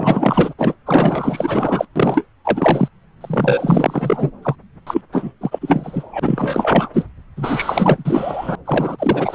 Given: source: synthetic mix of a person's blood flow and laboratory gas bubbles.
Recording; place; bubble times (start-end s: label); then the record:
Doppler ultrasound of blood flow; subclavian vein
0.00-0.54 s: bubbles
0.58-0.75 s: bubbles
0.85-1.88 s: bubbles
1.96-2.27 s: bubbles
2.44-2.88 s: bubbles
3.21-4.31 s: bubbles
4.42-4.55 s: bubbles
4.87-5.01 s: bubbles
5.12-5.32 s: bubbles
5.41-6.89 s: bubbles
6.93-7.05 s: bubbles
7.37-8.55 s: bubbles
8.65-9.35 s: bubbles
From the record:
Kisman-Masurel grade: 444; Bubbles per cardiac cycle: continuous sound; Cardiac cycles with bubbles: 100%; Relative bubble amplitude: maximal (0.775 to 0.999); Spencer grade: 4 (maximum detectable bubble signal sounding continuously throughout systole and diastole of every cardiac period, and overriding the amplitude of the normal cardiac signals); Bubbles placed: anywhere in the cardiac cycle